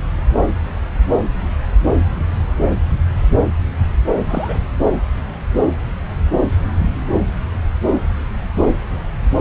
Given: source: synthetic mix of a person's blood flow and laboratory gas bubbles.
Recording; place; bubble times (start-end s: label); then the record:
Doppler ultrasound of blood flow; subclavian vein
4.28-4.65 s: bubbles
From the record:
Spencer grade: 1 (occasional bubble signal discernible with the cardiac motion signal, with majority of cardiac periods free of bubbles); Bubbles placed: anywhere in the cardiac cycle